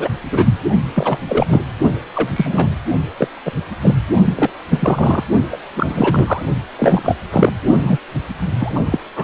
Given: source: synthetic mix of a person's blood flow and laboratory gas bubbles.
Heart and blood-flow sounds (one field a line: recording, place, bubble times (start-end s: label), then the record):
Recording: Doppler ultrasound of blood flow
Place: precordium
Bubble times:
0.00-0.09 s: bubbles
0.30-0.52 s: bubbles
0.95-1.19 s: bubbles
1.29-1.63 s: bubbles
2.14-2.29 s: bubbles
2.35-2.71 s: bubbles
3.17-3.28 s: bubbles
3.45-3.52 s: bubbles
3.81-3.94 s: bubbles
4.24-4.50 s: bubbles
4.70-5.23 s: bubbles
5.52-5.57 s: bubbles
5.74-6.42 s: bubbles
6.78-7.15 s: bubbles
7.31-7.52 s: bubbles
7.82-7.97 s: bubbles
8.60-8.80 s: bubbles
8.86-9.00 s: bubbles
9.16-9.24 s: bubbles
From the record:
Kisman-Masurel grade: 243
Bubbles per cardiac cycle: several, 3 to 8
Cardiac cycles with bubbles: 100%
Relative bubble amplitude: loud (0.450 to 0.775)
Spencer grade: 3 (all of the cardiac periods contain showers or single bubble signals, but not dominating or overriding the cardiac motion signals)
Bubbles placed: only in the low amplitude regions of the cardiac cycle